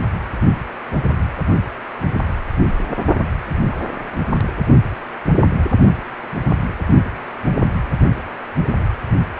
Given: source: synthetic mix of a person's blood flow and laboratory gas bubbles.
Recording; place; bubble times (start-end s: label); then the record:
Doppler ultrasound of blood flow; precordium
3.69-3.77 s: bubbles
4.12-4.18 s: bubbles
8.81-8.89 s: bubbles
From the record:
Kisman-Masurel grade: 121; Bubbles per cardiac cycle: 1 to 2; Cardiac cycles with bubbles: 10 to 50%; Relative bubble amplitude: barely perceptible (0.100 to 0.250); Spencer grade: 2 (many but less than half of the cardiac periods contain bubble signals, singularly or in groups); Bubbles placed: anywhere in the cardiac cycle